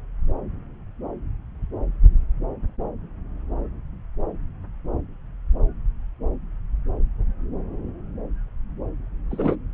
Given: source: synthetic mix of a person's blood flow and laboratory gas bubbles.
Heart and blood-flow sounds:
Doppler ultrasound of blood flow; subclavian vein
9.30-9.56 s: bubbles
From the record:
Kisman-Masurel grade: 122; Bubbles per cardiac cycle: 1 to 2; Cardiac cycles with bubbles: 10 to 50%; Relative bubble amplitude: moderate (0.250 to 0.450); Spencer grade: 2 (many but less than half of the cardiac periods contain bubble signals, singularly or in groups); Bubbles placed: anywhere in the cardiac cycle

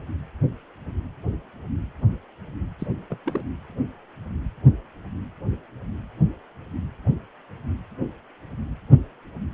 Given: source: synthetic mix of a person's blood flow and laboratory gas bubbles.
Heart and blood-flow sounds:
Doppler ultrasound of blood flow; precordium
2.79-2.87 s: bubbles
3.09-3.17 s: bubbles
3.25-3.42 s: bubbles
From the record:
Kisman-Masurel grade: 211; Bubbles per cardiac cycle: several, 3 to 8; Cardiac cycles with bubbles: 1 to 10%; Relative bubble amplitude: barely perceptible (0.100 to 0.250); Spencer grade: 1 (occasional bubble signal discernible with the cardiac motion signal, with majority of cardiac periods free of bubbles); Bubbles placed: anywhere in the cardiac cycle

